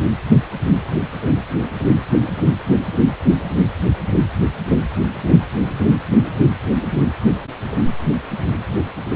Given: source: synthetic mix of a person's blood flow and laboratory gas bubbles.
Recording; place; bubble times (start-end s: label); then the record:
Doppler ultrasound of blood flow; precordium
no bubbles
From the record:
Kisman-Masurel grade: 000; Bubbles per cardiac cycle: 0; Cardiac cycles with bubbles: 0%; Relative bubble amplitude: no bubbles discernible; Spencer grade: 0 (complete lack of bubble signals)